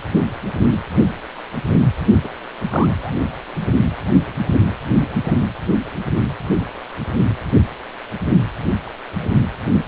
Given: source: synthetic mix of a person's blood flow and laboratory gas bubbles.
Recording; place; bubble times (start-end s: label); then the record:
Doppler ultrasound of blood flow; precordium
2.23-2.29 s: bubbles
2.63-3.14 s: bubbles
5.27-5.35 s: bubbles
From the record:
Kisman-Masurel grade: 122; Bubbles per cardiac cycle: 1 to 2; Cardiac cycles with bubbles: 10 to 50%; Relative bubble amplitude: moderate (0.250 to 0.450); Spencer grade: 2 (many but less than half of the cardiac periods contain bubble signals, singularly or in groups); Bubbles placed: anywhere in the cardiac cycle